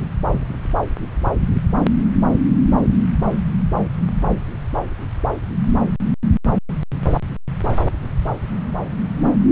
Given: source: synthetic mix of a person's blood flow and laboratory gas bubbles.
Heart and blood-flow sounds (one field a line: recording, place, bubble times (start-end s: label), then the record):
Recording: Doppler ultrasound of blood flow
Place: subclavian vein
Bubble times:
no bubbles
From the record:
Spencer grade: 0 (complete lack of bubble signals)